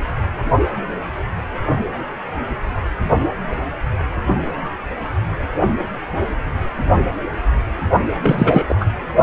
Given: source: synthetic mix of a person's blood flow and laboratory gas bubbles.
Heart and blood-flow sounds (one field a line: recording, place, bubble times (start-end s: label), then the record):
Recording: Doppler ultrasound of blood flow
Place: precordium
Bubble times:
8.22-8.63 s: bubbles
8.69-8.74 s: bubbles
8.80-8.85 s: bubbles
From the record:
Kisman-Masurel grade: 213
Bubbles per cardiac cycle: several, 3 to 8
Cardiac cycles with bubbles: 1 to 10%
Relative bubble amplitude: loud (0.450 to 0.775)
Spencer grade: 1 (occasional bubble signal discernible with the cardiac motion signal, with majority of cardiac periods free of bubbles)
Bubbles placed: only in the low amplitude regions of the cardiac cycle